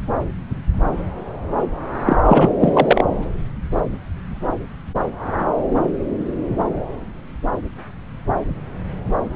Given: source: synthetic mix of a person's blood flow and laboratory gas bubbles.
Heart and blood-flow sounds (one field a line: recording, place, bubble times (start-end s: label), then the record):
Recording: Doppler ultrasound of blood flow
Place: subclavian vein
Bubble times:
2.05-2.17 s: bubbles
2.25-2.50 s: bubbles
2.61-3.03 s: bubbles
From the record:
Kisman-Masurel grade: 213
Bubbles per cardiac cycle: several, 3 to 8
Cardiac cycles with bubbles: 1 to 10%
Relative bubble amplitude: loud (0.450 to 0.775)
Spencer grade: 1 (occasional bubble signal discernible with the cardiac motion signal, with majority of cardiac periods free of bubbles)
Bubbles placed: anywhere in the cardiac cycle